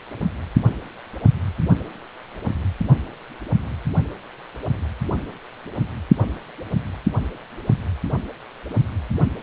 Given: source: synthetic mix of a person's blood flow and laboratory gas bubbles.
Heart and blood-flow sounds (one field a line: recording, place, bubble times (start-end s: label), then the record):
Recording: Doppler ultrasound of blood flow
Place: precordium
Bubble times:
no bubbles
From the record:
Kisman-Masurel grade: 000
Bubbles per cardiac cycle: 0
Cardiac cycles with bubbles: 0%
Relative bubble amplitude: no bubbles discernible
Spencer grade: 0 (complete lack of bubble signals)